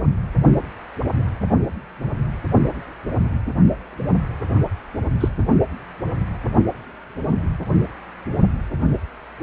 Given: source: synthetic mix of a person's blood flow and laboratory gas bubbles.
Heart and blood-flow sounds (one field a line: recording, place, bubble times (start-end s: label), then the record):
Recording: Doppler ultrasound of blood flow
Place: precordium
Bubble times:
5.20-5.28 s: bubbles
From the record:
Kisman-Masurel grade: 112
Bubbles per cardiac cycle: 1 to 2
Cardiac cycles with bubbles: 1 to 10%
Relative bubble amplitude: moderate (0.250 to 0.450)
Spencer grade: 1 (occasional bubble signal discernible with the cardiac motion signal, with majority of cardiac periods free of bubbles)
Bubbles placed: only in the low amplitude regions of the cardiac cycle